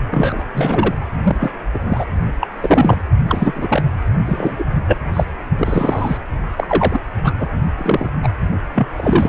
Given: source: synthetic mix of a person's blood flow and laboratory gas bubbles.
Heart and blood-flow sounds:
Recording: Doppler ultrasound of blood flow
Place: precordium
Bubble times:
0.11-0.44 s: bubbles
0.54-0.94 s: bubbles
1.23-1.37 s: bubbles
1.40-1.51 s: bubbles
1.74-1.78 s: bubbles
1.84-2.06 s: bubbles
2.40-2.48 s: bubbles
2.60-2.98 s: bubbles
3.29-3.83 s: bubbles
4.25-4.65 s: bubbles
4.87-5.00 s: bubbles
5.13-5.25 s: bubbles
5.58-6.17 s: bubbles
6.56-7.00 s: bubbles
7.24-7.33 s: bubbles
7.37-7.48 s: bubbles
7.79-8.08 s: bubbles
8.23-8.30 s: bubbles
8.74-8.88 s: bubbles
8.96-9.29 s: bubbles
From the record:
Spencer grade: 3 (all of the cardiac periods contain showers or single bubble signals, but not dominating or overriding the cardiac motion signals)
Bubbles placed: only in the low amplitude regions of the cardiac cycle

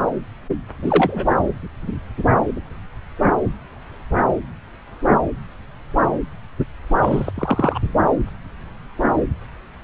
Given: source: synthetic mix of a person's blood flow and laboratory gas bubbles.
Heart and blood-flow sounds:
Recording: Doppler ultrasound of blood flow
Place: subclavian vein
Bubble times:
0.82-1.25 s: bubbles
7.02-7.31 s: bubbles
7.35-7.79 s: bubbles
From the record:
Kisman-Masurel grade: 223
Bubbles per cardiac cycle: several, 3 to 8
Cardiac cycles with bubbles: 10 to 50%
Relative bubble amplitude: loud (0.450 to 0.775)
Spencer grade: 2 (many but less than half of the cardiac periods contain bubble signals, singularly or in groups)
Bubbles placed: anywhere in the cardiac cycle

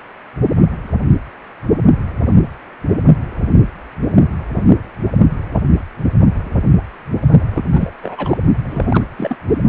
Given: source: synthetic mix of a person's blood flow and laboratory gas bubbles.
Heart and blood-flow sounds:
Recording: Doppler ultrasound of blood flow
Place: precordium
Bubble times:
7.50-7.63 s: bubbles
7.67-7.90 s: bubbles
8.03-8.38 s: bubbles
8.64-9.04 s: bubbles
9.17-9.36 s: bubbles
From the record:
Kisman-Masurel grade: 222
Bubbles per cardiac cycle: several, 3 to 8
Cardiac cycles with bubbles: 10 to 50%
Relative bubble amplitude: moderate (0.250 to 0.450)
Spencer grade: 2 (many but less than half of the cardiac periods contain bubble signals, singularly or in groups)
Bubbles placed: only in the low amplitude regions of the cardiac cycle

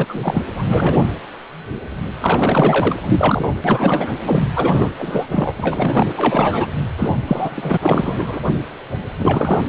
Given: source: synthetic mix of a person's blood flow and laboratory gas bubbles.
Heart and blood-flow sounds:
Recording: Doppler ultrasound of blood flow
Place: precordium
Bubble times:
0.00-0.42 s: bubbles
0.56-1.07 s: bubbles
2.21-2.93 s: bubbles
3.02-3.52 s: bubbles
3.64-4.12 s: bubbles
4.24-4.44 s: bubbles
4.55-4.90 s: bubbles
4.98-5.26 s: bubbles
5.30-5.53 s: bubbles
5.59-6.07 s: bubbles
6.17-6.67 s: bubbles
6.97-7.16 s: bubbles
7.27-7.78 s: bubbles
7.81-8.38 s: bubbles
9.19-9.68 s: bubbles
From the record:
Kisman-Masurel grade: 333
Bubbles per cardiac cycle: rolling drumbeat, 9 or more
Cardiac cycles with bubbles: 50 to 99%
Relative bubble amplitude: loud (0.450 to 0.775)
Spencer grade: 3 (all of the cardiac periods contain showers or single bubble signals, but not dominating or overriding the cardiac motion signals)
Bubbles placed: anywhere in the cardiac cycle

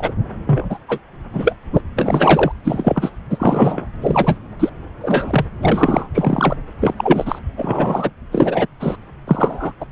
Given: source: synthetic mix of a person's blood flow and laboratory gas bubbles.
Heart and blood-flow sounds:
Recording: Doppler ultrasound of blood flow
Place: subclavian vein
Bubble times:
0.00-0.12 s: bubbles
0.46-0.78 s: bubbles
0.88-0.99 s: bubbles
1.33-1.55 s: bubbles
1.74-1.81 s: bubbles
1.96-2.52 s: bubbles
2.64-3.10 s: bubbles
3.30-3.87 s: bubbles
4.01-4.38 s: bubbles
4.59-4.69 s: bubbles
5.00-5.46 s: bubbles
5.60-6.08 s: bubbles
6.14-6.56 s: bubbles
6.80-6.93 s: bubbles
6.97-7.38 s: bubbles
7.57-8.11 s: bubbles
8.32-8.67 s: bubbles
8.80-8.96 s: bubbles
9.27-9.73 s: bubbles
9.81-9.85 s: bubbles
From the record:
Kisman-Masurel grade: 243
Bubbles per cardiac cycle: several, 3 to 8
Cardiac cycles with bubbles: 100%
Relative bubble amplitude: loud (0.450 to 0.775)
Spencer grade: 3 (all of the cardiac periods contain showers or single bubble signals, but not dominating or overriding the cardiac motion signals)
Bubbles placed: anywhere in the cardiac cycle

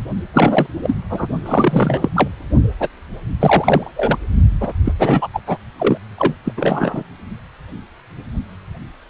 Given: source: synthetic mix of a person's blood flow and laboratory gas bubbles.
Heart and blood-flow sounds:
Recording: Doppler ultrasound of blood flow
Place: precordium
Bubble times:
0.33-0.66 s: bubbles
0.83-0.96 s: bubbles
1.10-1.27 s: bubbles
1.46-2.10 s: bubbles
2.16-2.29 s: bubbles
2.79-2.88 s: bubbles
3.40-3.92 s: bubbles
3.96-4.18 s: bubbles
4.61-4.72 s: bubbles
4.85-4.92 s: bubbles
4.99-5.28 s: bubbles
5.33-5.41 s: bubbles
5.46-5.58 s: bubbles
5.78-5.98 s: bubbles
6.18-6.33 s: bubbles
6.45-6.53 s: bubbles
6.57-7.04 s: bubbles
From the record:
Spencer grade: 3 (all of the cardiac periods contain showers or single bubble signals, but not dominating or overriding the cardiac motion signals)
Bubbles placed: only in the low amplitude regions of the cardiac cycle

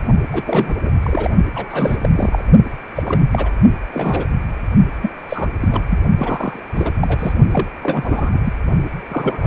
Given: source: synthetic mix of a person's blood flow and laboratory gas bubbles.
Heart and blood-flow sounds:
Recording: Doppler ultrasound of blood flow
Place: precordium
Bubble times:
0.33-0.43 s: bubbles
0.46-0.73 s: bubbles
0.84-0.91 s: bubbles
1.03-1.30 s: bubbles
1.54-1.67 s: bubbles
1.70-2.45 s: bubbles
2.96-3.29 s: bubbles
3.31-3.51 s: bubbles
3.94-4.25 s: bubbles
5.01-5.11 s: bubbles
5.28-5.48 s: bubbles
5.60-6.02 s: bubbles
6.17-6.59 s: bubbles
6.74-6.91 s: bubbles
7.00-7.33 s: bubbles
7.51-7.68 s: bubbles
7.82-8.40 s: bubbles
8.45-8.53 s: bubbles
9.08-9.47 s: bubbles
From the record:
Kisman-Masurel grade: 342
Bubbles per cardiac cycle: rolling drumbeat, 9 or more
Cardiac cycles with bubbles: 100%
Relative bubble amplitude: moderate (0.250 to 0.450)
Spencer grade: 3 (all of the cardiac periods contain showers or single bubble signals, but not dominating or overriding the cardiac motion signals)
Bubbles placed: only in the low amplitude regions of the cardiac cycle

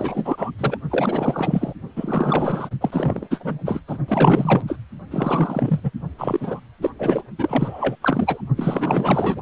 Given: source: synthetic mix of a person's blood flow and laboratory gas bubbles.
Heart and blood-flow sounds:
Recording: Doppler ultrasound of blood flow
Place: precordium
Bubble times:
0.00-0.51 s: bubbles
0.58-0.77 s: bubbles
0.90-1.74 s: bubbles
1.96-2.71 s: bubbles
2.81-3.27 s: bubbles
3.31-3.59 s: bubbles
3.65-3.80 s: bubbles
3.88-3.98 s: bubbles
4.08-4.62 s: bubbles
4.67-4.79 s: bubbles
5.11-5.80 s: bubbles
5.83-5.92 s: bubbles
6.18-6.60 s: bubbles
6.81-6.91 s: bubbles
6.99-7.22 s: bubbles
7.38-7.96 s: bubbles
8.02-8.41 s: bubbles
8.56-9.41 s: bubbles
From the record:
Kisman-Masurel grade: 444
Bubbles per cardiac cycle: continuous sound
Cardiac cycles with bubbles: 100%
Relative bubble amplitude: maximal (0.775 to 0.999)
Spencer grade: 4 (maximum detectable bubble signal sounding continuously throughout systole and diastole of every cardiac period, and overriding the amplitude of the normal cardiac signals)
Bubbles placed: only in the low amplitude regions of the cardiac cycle

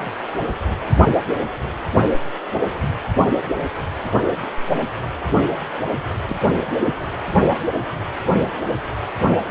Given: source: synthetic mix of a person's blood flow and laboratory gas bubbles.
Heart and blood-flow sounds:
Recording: Doppler ultrasound of blood flow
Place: precordium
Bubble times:
1.38-1.48 s: bubbles
6.27-6.37 s: bubbles
From the record:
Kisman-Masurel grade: 121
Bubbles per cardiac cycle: 1 to 2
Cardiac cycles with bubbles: 10 to 50%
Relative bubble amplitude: barely perceptible (0.100 to 0.250)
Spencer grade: 2 (many but less than half of the cardiac periods contain bubble signals, singularly or in groups)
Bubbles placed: only in the low amplitude regions of the cardiac cycle

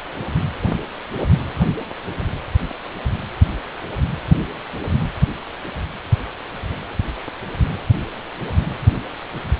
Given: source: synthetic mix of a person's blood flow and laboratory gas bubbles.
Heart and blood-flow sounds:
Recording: Doppler ultrasound of blood flow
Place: precordium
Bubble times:
no bubbles
From the record:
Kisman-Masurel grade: 000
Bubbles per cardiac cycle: 0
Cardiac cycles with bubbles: 0%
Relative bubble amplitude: no bubbles discernible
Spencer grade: 0 (complete lack of bubble signals)

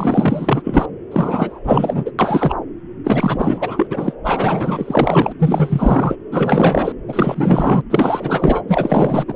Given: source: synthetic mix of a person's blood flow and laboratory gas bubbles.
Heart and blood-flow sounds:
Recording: Doppler ultrasound of blood flow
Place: subclavian vein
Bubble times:
0.00-0.85 s: bubbles
1.11-1.60 s: bubbles
1.64-2.11 s: bubbles
2.19-2.55 s: bubbles
3.04-3.87 s: bubbles
3.90-4.13 s: bubbles
4.25-5.33 s: bubbles
5.39-6.16 s: bubbles
6.32-6.92 s: bubbles
7.08-7.82 s: bubbles
7.90-8.61 s: bubbles
8.68-9.25 s: bubbles
9.27-9.34 s: bubbles
From the record:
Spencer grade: 4 (maximum detectable bubble signal sounding continuously throughout systole and diastole of every cardiac period, and overriding the amplitude of the normal cardiac signals)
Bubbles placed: anywhere in the cardiac cycle

